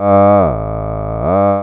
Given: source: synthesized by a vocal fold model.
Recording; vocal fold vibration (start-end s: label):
sustained vowel that changes in the middle
0.00-0.37 s: 100.0 Hz, open quotient 0.37
0.57-1.17 s: 53.7 Hz, open quotient 0.38
1.37-1.63 s: 100.0 Hz, open quotient 0.37